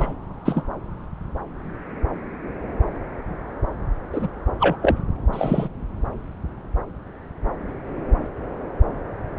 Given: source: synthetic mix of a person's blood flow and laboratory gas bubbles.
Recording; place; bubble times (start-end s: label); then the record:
Doppler ultrasound of blood flow; subclavian vein
0.00-0.13 s: bubbles
0.45-0.64 s: bubbles
4.12-4.28 s: bubbles
4.60-4.76 s: bubbles
4.82-4.97 s: bubbles
5.32-5.68 s: bubbles
From the record:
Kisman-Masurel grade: 123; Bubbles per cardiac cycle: 1 to 2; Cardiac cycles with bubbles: 10 to 50%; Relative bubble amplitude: loud (0.450 to 0.775); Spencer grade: 2 (many but less than half of the cardiac periods contain bubble signals, singularly or in groups); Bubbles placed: anywhere in the cardiac cycle